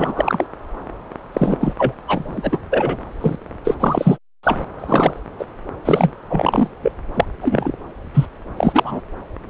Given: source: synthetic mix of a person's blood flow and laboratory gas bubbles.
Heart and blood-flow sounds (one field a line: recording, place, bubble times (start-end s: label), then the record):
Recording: Doppler ultrasound of blood flow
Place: subclavian vein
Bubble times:
0.00-0.47 s: bubbles
1.33-1.58 s: bubbles
1.60-1.73 s: bubbles
1.78-1.93 s: bubbles
2.08-2.58 s: bubbles
2.72-2.98 s: bubbles
3.21-3.35 s: bubbles
3.64-3.75 s: bubbles
3.80-4.19 s: bubbles
4.43-4.56 s: bubbles
4.79-5.20 s: bubbles
5.39-5.45 s: bubbles
5.84-6.13 s: bubbles
6.29-6.68 s: bubbles
6.83-6.92 s: bubbles
7.14-7.25 s: bubbles
7.42-7.71 s: bubbles
8.13-8.26 s: bubbles
8.56-9.00 s: bubbles
From the record:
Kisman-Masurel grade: 243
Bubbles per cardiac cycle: several, 3 to 8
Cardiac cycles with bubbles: 100%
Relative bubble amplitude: loud (0.450 to 0.775)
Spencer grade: 3 (all of the cardiac periods contain showers or single bubble signals, but not dominating or overriding the cardiac motion signals)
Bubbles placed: anywhere in the cardiac cycle